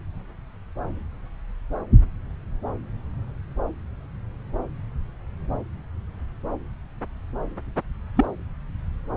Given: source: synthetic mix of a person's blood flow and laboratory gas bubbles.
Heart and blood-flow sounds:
Doppler ultrasound of blood flow; subclavian vein
8.16-8.25 s: bubbles
From the record:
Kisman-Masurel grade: 112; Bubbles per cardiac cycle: 1 to 2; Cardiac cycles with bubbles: 1 to 10%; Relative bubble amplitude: moderate (0.250 to 0.450); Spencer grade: 1 (occasional bubble signal discernible with the cardiac motion signal, with majority of cardiac periods free of bubbles); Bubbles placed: anywhere in the cardiac cycle

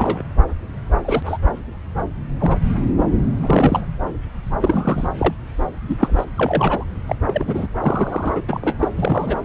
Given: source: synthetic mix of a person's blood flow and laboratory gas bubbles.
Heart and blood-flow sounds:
Doppler ultrasound of blood flow; subclavian vein
0.00-0.22 s: bubbles
1.05-1.38 s: bubbles
2.39-2.56 s: bubbles
3.35-3.81 s: bubbles
4.60-5.08 s: bubbles
5.18-5.34 s: bubbles
5.88-5.96 s: bubbles
5.99-6.25 s: bubbles
6.36-6.85 s: bubbles
7.06-7.16 s: bubbles
7.25-7.68 s: bubbles
7.81-8.42 s: bubbles
8.47-8.88 s: bubbles
8.97-9.37 s: bubbles
From the record:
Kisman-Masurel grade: 232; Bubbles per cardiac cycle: several, 3 to 8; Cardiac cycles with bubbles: 50 to 99%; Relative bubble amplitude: moderate (0.250 to 0.450); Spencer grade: 3 (all of the cardiac periods contain showers or single bubble signals, but not dominating or overriding the cardiac motion signals); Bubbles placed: anywhere in the cardiac cycle

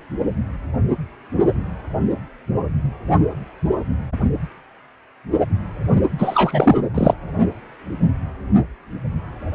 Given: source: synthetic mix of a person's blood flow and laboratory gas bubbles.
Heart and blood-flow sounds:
Doppler ultrasound of blood flow; precordium
6.18-6.78 s: bubbles
6.94-7.14 s: bubbles
From the record:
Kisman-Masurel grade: 223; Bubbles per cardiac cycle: several, 3 to 8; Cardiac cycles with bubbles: 10 to 50%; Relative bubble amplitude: loud (0.450 to 0.775); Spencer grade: 2 (many but less than half of the cardiac periods contain bubble signals, singularly or in groups); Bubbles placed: only in the low amplitude regions of the cardiac cycle

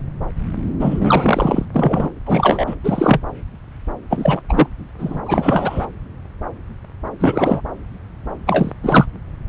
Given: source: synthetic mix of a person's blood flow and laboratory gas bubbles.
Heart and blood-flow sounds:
Doppler ultrasound of blood flow; subclavian vein
0.80-1.66 s: bubbles
1.74-2.09 s: bubbles
2.25-2.75 s: bubbles
2.83-3.21 s: bubbles
4.09-4.41 s: bubbles
4.49-4.67 s: bubbles
4.99-5.21 s: bubbles
5.25-5.87 s: bubbles
7.19-7.61 s: bubbles
8.46-8.71 s: bubbles
8.82-9.05 s: bubbles
From the record:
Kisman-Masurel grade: 333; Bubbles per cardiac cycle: rolling drumbeat, 9 or more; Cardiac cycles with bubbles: 50 to 99%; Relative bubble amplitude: loud (0.450 to 0.775); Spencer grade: 3 (all of the cardiac periods contain showers or single bubble signals, but not dominating or overriding the cardiac motion signals); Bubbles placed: anywhere in the cardiac cycle

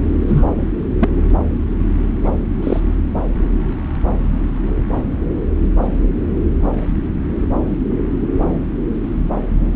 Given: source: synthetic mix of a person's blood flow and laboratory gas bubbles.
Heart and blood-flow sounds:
Doppler ultrasound of blood flow; subclavian vein
0.27-0.46 s: bubbles
1.00-1.10 s: bubbles
2.24-2.30 s: bubbles
2.62-2.80 s: bubbles
From the record:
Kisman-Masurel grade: 123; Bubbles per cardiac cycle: 1 to 2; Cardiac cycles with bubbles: 10 to 50%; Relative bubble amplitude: loud (0.450 to 0.775); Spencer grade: 2 (many but less than half of the cardiac periods contain bubble signals, singularly or in groups); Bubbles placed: anywhere in the cardiac cycle

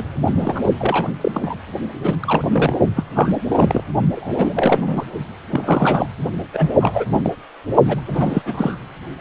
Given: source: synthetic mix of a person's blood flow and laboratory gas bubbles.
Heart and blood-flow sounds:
Doppler ultrasound of blood flow; precordium
0.00-0.04 s: bubbles
0.26-0.69 s: bubbles
0.79-1.12 s: bubbles
1.21-1.56 s: bubbles
2.03-2.16 s: bubbles
2.21-2.79 s: bubbles
2.96-3.04 s: bubbles
3.15-3.41 s: bubbles
3.48-3.84 s: bubbles
4.15-5.06 s: bubbles
5.50-6.08 s: bubbles
6.53-6.75 s: bubbles
6.81-7.05 s: bubbles
7.12-7.31 s: bubbles
7.86-8.00 s: bubbles
8.06-8.78 s: bubbles
From the record:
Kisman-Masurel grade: 342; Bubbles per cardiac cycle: rolling drumbeat, 9 or more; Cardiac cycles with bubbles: 100%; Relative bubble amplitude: moderate (0.250 to 0.450); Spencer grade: 3 (all of the cardiac periods contain showers or single bubble signals, but not dominating or overriding the cardiac motion signals); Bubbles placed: only in the low amplitude regions of the cardiac cycle

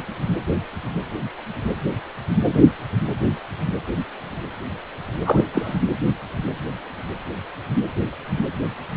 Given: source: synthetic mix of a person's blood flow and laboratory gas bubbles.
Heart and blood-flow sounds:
Doppler ultrasound of blood flow; precordium
5.26-5.45 s: bubbles
5.53-5.79 s: bubbles
From the record:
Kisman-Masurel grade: 212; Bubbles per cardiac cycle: several, 3 to 8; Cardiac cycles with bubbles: 1 to 10%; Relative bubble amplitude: moderate (0.250 to 0.450); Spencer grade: 1 (occasional bubble signal discernible with the cardiac motion signal, with majority of cardiac periods free of bubbles); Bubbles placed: anywhere in the cardiac cycle

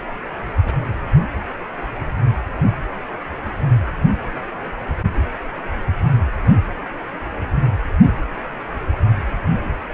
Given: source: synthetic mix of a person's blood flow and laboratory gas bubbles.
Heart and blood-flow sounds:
Doppler ultrasound of blood flow; precordium
0.64-0.72 s: bubbles
From the record:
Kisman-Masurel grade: 111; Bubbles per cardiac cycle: 1 to 2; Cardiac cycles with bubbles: 1 to 10%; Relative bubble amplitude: barely perceptible (0.100 to 0.250); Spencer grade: 1 (occasional bubble signal discernible with the cardiac motion signal, with majority of cardiac periods free of bubbles); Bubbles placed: anywhere in the cardiac cycle

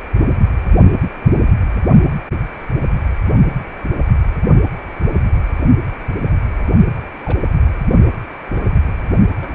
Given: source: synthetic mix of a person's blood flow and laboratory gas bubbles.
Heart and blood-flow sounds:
Doppler ultrasound of blood flow; precordium
7.25-7.50 s: bubbles
7.54-7.61 s: bubbles
8.41-8.62 s: bubbles
9.40-9.55 s: bubbles
From the record:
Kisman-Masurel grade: 121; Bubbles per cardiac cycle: 1 to 2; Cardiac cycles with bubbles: 10 to 50%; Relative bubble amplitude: barely perceptible (0.100 to 0.250); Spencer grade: 2 (many but less than half of the cardiac periods contain bubble signals, singularly or in groups); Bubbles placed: only in the low amplitude regions of the cardiac cycle

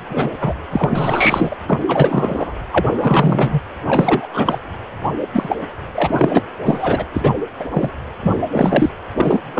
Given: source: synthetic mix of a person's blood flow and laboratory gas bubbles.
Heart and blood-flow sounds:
Doppler ultrasound of blood flow; precordium
0.09-0.29 s: bubbles
0.41-0.55 s: bubbles
0.71-1.57 s: bubbles
1.67-1.81 s: bubbles
1.87-2.53 s: bubbles
2.71-3.61 s: bubbles
3.84-4.27 s: bubbles
4.33-4.61 s: bubbles
5.21-5.28 s: bubbles
5.33-5.57 s: bubbles
5.93-6.43 s: bubbles
6.65-7.04 s: bubbles
7.14-7.32 s: bubbles
7.59-7.67 s: bubbles
7.71-7.90 s: bubbles
8.22-8.31 s: bubbles
8.52-8.90 s: bubbles
9.16-9.38 s: bubbles
9.54-9.60 s: bubbles
From the record:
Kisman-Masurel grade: 343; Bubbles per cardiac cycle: rolling drumbeat, 9 or more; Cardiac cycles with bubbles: 100%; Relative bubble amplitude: loud (0.450 to 0.775); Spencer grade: 3 (all of the cardiac periods contain showers or single bubble signals, but not dominating or overriding the cardiac motion signals); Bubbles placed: anywhere in the cardiac cycle

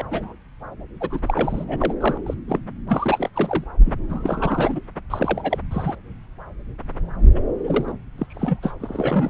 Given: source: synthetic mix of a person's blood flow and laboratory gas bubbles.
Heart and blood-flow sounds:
Doppler ultrasound of blood flow; subclavian vein
0.00-0.03 s: bubbles
0.11-0.34 s: bubbles
1.00-1.65 s: bubbles
1.68-1.94 s: bubbles
2.00-2.17 s: bubbles
2.26-2.34 s: bubbles
2.48-2.60 s: bubbles
2.88-3.29 s: bubbles
3.34-3.64 s: bubbles
3.85-3.93 s: bubbles
4.10-4.79 s: bubbles
5.10-5.58 s: bubbles
5.71-5.95 s: bubbles
7.35-7.41 s: bubbles
7.63-7.94 s: bubbles
8.18-8.26 s: bubbles
8.29-8.60 s: bubbles
8.62-8.71 s: bubbles
8.80-9.30 s: bubbles
From the record:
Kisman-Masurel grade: 332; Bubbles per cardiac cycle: rolling drumbeat, 9 or more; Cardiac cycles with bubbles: 50 to 99%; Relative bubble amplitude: moderate (0.250 to 0.450); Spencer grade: 3 (all of the cardiac periods contain showers or single bubble signals, but not dominating or overriding the cardiac motion signals); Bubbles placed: anywhere in the cardiac cycle

